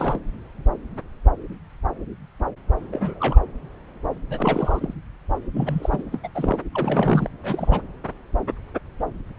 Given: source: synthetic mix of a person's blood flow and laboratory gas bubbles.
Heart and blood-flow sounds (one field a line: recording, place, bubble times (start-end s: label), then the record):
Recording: Doppler ultrasound of blood flow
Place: subclavian vein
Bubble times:
0.00-0.19 s: bubbles
2.92-3.39 s: bubbles
4.29-4.93 s: bubbles
5.54-6.02 s: bubbles
6.12-6.19 s: bubbles
6.23-6.27 s: bubbles
6.34-6.59 s: bubbles
6.74-7.29 s: bubbles
7.43-7.81 s: bubbles
From the record:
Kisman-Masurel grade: 221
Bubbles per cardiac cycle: several, 3 to 8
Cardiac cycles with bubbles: 10 to 50%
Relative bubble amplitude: barely perceptible (0.100 to 0.250)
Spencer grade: 2 (many but less than half of the cardiac periods contain bubble signals, singularly or in groups)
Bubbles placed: anywhere in the cardiac cycle